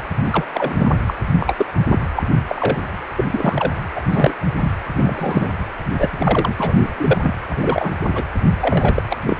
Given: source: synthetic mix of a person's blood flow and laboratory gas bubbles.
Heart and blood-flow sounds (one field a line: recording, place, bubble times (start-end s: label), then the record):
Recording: Doppler ultrasound of blood flow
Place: precordium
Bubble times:
0.24-0.44 s: bubbles
0.54-0.97 s: bubbles
1.06-1.14 s: bubbles
1.38-1.66 s: bubbles
1.89-1.99 s: bubbles
2.16-2.23 s: bubbles
2.48-2.80 s: bubbles
3.16-3.25 s: bubbles
3.31-3.73 s: bubbles
3.95-4.01 s: bubbles
4.10-4.34 s: bubbles
4.59-4.72 s: bubbles
4.97-5.47 s: bubbles
5.98-7.34 s: bubbles
7.49-7.92 s: bubbles
8.00-8.23 s: bubbles
8.61-9.03 s: bubbles
9.09-9.17 s: bubbles
9.24-9.37 s: bubbles
From the record:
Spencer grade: 3 (all of the cardiac periods contain showers or single bubble signals, but not dominating or overriding the cardiac motion signals)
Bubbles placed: anywhere in the cardiac cycle